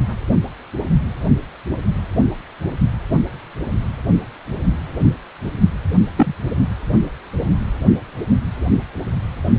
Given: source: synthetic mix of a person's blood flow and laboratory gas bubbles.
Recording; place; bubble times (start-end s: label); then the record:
Doppler ultrasound of blood flow; precordium
6.16-6.34 s: bubbles
From the record:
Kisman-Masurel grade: 123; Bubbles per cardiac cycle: 1 to 2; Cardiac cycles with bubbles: 10 to 50%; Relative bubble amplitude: loud (0.450 to 0.775); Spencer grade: 2 (many but less than half of the cardiac periods contain bubble signals, singularly or in groups); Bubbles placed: anywhere in the cardiac cycle